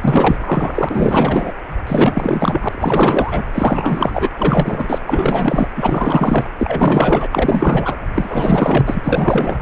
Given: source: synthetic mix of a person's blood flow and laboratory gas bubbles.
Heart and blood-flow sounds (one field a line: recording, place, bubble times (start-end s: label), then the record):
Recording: Doppler ultrasound of blood flow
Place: precordium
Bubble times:
0.01-0.38 s: bubbles
0.40-1.52 s: bubbles
1.87-2.69 s: bubbles
2.71-3.42 s: bubbles
3.52-4.30 s: bubbles
4.38-4.99 s: bubbles
5.07-5.67 s: bubbles
5.76-6.45 s: bubbles
6.58-7.26 s: bubbles
7.32-7.96 s: bubbles
8.14-9.62 s: bubbles
From the record:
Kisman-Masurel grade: 444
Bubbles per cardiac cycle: continuous sound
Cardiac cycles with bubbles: 100%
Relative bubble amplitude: maximal (0.775 to 0.999)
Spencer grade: 4 (maximum detectable bubble signal sounding continuously throughout systole and diastole of every cardiac period, and overriding the amplitude of the normal cardiac signals)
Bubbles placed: anywhere in the cardiac cycle